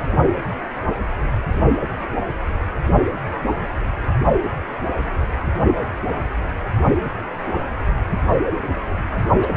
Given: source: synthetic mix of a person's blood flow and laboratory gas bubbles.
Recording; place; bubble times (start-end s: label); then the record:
Doppler ultrasound of blood flow; precordium
9.41-9.47 s: bubbles
From the record:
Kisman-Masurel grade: 212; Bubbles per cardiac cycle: several, 3 to 8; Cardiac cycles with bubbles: 1 to 10%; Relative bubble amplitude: moderate (0.250 to 0.450); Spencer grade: 1 (occasional bubble signal discernible with the cardiac motion signal, with majority of cardiac periods free of bubbles); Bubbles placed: anywhere in the cardiac cycle